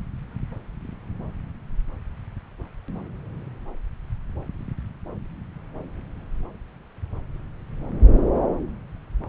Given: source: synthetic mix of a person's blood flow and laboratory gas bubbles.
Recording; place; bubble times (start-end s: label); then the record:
Doppler ultrasound of blood flow; subclavian vein
no bubbles
From the record:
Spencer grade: 0 (complete lack of bubble signals)